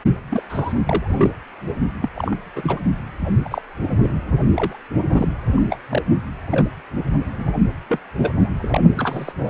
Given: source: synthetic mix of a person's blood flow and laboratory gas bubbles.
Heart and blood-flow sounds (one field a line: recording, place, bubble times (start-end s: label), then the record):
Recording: Doppler ultrasound of blood flow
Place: precordium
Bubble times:
0.31-0.43 s: bubbles
0.49-0.74 s: bubbles
0.87-1.31 s: bubbles
2.01-2.10 s: bubbles
2.15-2.35 s: bubbles
2.55-2.80 s: bubbles
3.45-3.62 s: bubbles
3.79-4.20 s: bubbles
4.54-4.79 s: bubbles
4.98-5.28 s: bubbles
5.55-5.66 s: bubbles
5.70-5.78 s: bubbles
5.90-6.02 s: bubbles
6.47-6.68 s: bubbles
7.38-7.53 s: bubbles
7.89-7.99 s: bubbles
8.21-8.33 s: bubbles
8.57-8.80 s: bubbles
8.96-9.32 s: bubbles
9.38-9.50 s: bubbles
From the record:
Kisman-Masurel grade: 242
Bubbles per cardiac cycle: several, 3 to 8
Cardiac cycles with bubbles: 100%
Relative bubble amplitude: moderate (0.250 to 0.450)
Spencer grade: 3 (all of the cardiac periods contain showers or single bubble signals, but not dominating or overriding the cardiac motion signals)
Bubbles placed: only in the low amplitude regions of the cardiac cycle